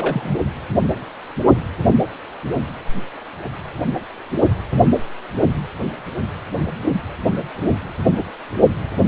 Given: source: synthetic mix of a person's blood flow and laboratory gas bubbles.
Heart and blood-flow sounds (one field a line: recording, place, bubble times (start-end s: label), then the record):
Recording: Doppler ultrasound of blood flow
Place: precordium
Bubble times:
0.00-0.38 s: bubbles
From the record:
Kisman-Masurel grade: 212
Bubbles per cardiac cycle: several, 3 to 8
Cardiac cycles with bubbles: 1 to 10%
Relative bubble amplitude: moderate (0.250 to 0.450)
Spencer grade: 1 (occasional bubble signal discernible with the cardiac motion signal, with majority of cardiac periods free of bubbles)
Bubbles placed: only in the low amplitude regions of the cardiac cycle